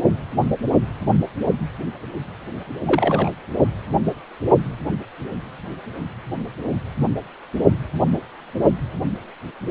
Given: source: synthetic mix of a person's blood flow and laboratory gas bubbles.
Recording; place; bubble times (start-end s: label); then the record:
Doppler ultrasound of blood flow; precordium
2.86-3.30 s: bubbles
From the record:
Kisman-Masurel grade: 113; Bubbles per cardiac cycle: 1 to 2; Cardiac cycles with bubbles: 1 to 10%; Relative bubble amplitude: loud (0.450 to 0.775); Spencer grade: 1 (occasional bubble signal discernible with the cardiac motion signal, with majority of cardiac periods free of bubbles); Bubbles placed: anywhere in the cardiac cycle